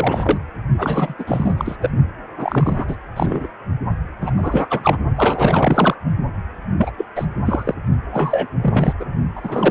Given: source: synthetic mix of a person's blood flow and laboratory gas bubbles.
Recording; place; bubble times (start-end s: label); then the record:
Doppler ultrasound of blood flow; precordium
0.00-0.39 s: bubbles
0.78-1.14 s: bubbles
1.19-1.76 s: bubbles
1.81-1.90 s: bubbles
2.39-2.98 s: bubbles
3.16-3.47 s: bubbles
4.21-4.31 s: bubbles
4.36-4.98 s: bubbles
5.16-5.96 s: bubbles
6.78-6.92 s: bubbles
6.97-7.05 s: bubbles
7.16-7.28 s: bubbles
7.45-7.75 s: bubbles
8.11-8.47 s: bubbles
8.62-8.93 s: bubbles
9.00-9.04 s: bubbles
9.36-9.71 s: bubbles
From the record:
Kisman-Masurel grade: 343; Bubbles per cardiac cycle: rolling drumbeat, 9 or more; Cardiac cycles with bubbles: 100%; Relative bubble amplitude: loud (0.450 to 0.775); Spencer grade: 3 (all of the cardiac periods contain showers or single bubble signals, but not dominating or overriding the cardiac motion signals); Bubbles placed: only in the low amplitude regions of the cardiac cycle